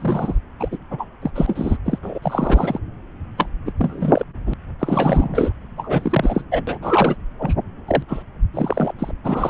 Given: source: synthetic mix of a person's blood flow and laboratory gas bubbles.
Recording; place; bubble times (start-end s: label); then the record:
Doppler ultrasound of blood flow; subclavian vein
0.00-0.39 s: bubbles
0.59-0.69 s: bubbles
0.72-0.77 s: bubbles
0.91-1.08 s: bubbles
1.22-1.31 s: bubbles
1.35-1.78 s: bubbles
1.85-1.99 s: bubbles
2.02-2.19 s: bubbles
2.22-2.79 s: bubbles
3.38-3.48 s: bubbles
3.65-3.72 s: bubbles
3.78-4.24 s: bubbles
4.46-4.54 s: bubbles
4.79-5.53 s: bubbles
5.77-6.44 s: bubbles
6.51-6.64 s: bubbles
6.67-6.78 s: bubbles
6.82-7.16 s: bubbles
7.39-7.54 s: bubbles
7.87-8.03 s: bubbles
8.08-8.22 s: bubbles
8.54-8.93 s: bubbles
8.98-9.12 s: bubbles
9.23-9.50 s: bubbles
From the record:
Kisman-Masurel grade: 342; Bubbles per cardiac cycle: rolling drumbeat, 9 or more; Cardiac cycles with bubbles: 100%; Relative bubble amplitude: moderate (0.250 to 0.450); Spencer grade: 3 (all of the cardiac periods contain showers or single bubble signals, but not dominating or overriding the cardiac motion signals); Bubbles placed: anywhere in the cardiac cycle